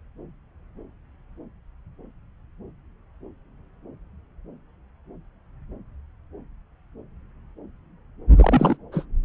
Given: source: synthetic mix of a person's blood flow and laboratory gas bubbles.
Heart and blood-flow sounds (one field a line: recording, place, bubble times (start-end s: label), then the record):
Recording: Doppler ultrasound of blood flow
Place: subclavian vein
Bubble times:
8.36-8.76 s: bubbles
8.92-9.04 s: bubbles
From the record:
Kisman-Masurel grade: 212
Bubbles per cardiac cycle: several, 3 to 8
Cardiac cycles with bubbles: 1 to 10%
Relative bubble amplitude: moderate (0.250 to 0.450)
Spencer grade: 1 (occasional bubble signal discernible with the cardiac motion signal, with majority of cardiac periods free of bubbles)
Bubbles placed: anywhere in the cardiac cycle